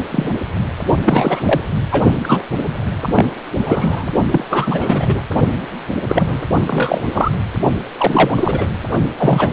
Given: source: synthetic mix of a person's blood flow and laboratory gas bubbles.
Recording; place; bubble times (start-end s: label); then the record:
Doppler ultrasound of blood flow; precordium
0.12-0.29 s: bubbles
1.00-1.61 s: bubbles
1.91-2.04 s: bubbles
2.24-2.43 s: bubbles
3.02-3.26 s: bubbles
3.53-4.09 s: bubbles
4.31-4.44 s: bubbles
4.50-5.21 s: bubbles
6.08-6.48 s: bubbles
6.67-7.02 s: bubbles
7.12-7.32 s: bubbles
7.98-8.68 s: bubbles
9.18-9.50 s: bubbles
From the record:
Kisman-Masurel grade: 243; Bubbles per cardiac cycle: several, 3 to 8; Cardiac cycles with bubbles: 100%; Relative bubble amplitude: loud (0.450 to 0.775); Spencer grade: 3 (all of the cardiac periods contain showers or single bubble signals, but not dominating or overriding the cardiac motion signals); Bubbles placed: only in the low amplitude regions of the cardiac cycle